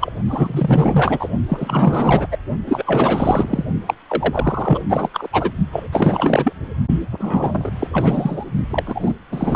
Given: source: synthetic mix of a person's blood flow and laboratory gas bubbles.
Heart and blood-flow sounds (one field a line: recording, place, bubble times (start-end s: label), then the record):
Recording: Doppler ultrasound of blood flow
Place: precordium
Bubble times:
0.00-0.12 s: bubbles
0.26-1.29 s: bubbles
1.49-2.27 s: bubbles
2.31-2.38 s: bubbles
2.65-3.65 s: bubbles
3.86-3.94 s: bubbles
4.08-4.82 s: bubbles
4.89-5.09 s: bubbles
5.13-5.27 s: bubbles
5.32-5.51 s: bubbles
5.72-5.88 s: bubbles
5.92-6.53 s: bubbles
7.11-7.71 s: bubbles
7.79-7.87 s: bubbles
7.93-8.45 s: bubbles
8.70-9.14 s: bubbles
9.31-9.56 s: bubbles
From the record:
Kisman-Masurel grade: 444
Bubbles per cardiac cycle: continuous sound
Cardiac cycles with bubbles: 100%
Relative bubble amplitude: maximal (0.775 to 0.999)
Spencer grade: 4 (maximum detectable bubble signal sounding continuously throughout systole and diastole of every cardiac period, and overriding the amplitude of the normal cardiac signals)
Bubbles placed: only in the low amplitude regions of the cardiac cycle